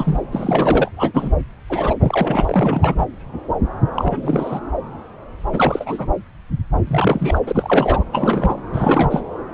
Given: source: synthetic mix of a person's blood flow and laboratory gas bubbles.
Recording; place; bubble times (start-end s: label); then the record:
Doppler ultrasound of blood flow; subclavian vein
0.00-0.22 s: bubbles
0.32-0.91 s: bubbles
0.96-1.34 s: bubbles
1.70-1.94 s: bubbles
2.00-3.07 s: bubbles
3.95-4.59 s: bubbles
5.52-6.07 s: bubbles
6.87-7.39 s: bubbles
7.46-8.05 s: bubbles
8.12-8.54 s: bubbles
8.73-9.21 s: bubbles
From the record:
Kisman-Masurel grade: 332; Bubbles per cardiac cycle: rolling drumbeat, 9 or more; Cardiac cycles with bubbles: 50 to 99%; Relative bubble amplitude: moderate (0.250 to 0.450); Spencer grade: 3 (all of the cardiac periods contain showers or single bubble signals, but not dominating or overriding the cardiac motion signals); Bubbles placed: anywhere in the cardiac cycle